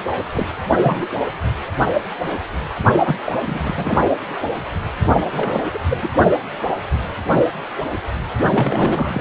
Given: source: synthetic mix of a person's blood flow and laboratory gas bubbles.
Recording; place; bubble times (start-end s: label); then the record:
Doppler ultrasound of blood flow; precordium
0.32-0.47 s: bubbles
0.82-1.06 s: bubbles
1.80-1.85 s: bubbles
3.04-3.16 s: bubbles
3.26-3.32 s: bubbles
3.42-3.59 s: bubbles
3.62-3.73 s: bubbles
3.77-3.99 s: bubbles
5.25-5.63 s: bubbles
5.74-5.79 s: bubbles
5.90-5.97 s: bubbles
6.02-6.08 s: bubbles
8.49-9.21 s: bubbles
From the record:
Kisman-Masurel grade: 232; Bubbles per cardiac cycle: several, 3 to 8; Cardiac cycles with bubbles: 50 to 99%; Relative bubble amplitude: moderate (0.250 to 0.450); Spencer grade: 3 (all of the cardiac periods contain showers or single bubble signals, but not dominating or overriding the cardiac motion signals); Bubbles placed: anywhere in the cardiac cycle